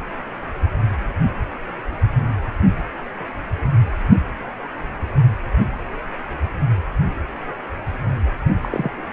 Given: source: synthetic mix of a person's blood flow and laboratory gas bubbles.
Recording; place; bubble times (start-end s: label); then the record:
Doppler ultrasound of blood flow; precordium
8.62-8.69 s: bubbles
8.71-8.91 s: bubbles
From the record:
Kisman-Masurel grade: 221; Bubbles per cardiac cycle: several, 3 to 8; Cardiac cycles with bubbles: 10 to 50%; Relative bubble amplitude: barely perceptible (0.100 to 0.250); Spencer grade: 2 (many but less than half of the cardiac periods contain bubble signals, singularly or in groups); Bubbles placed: anywhere in the cardiac cycle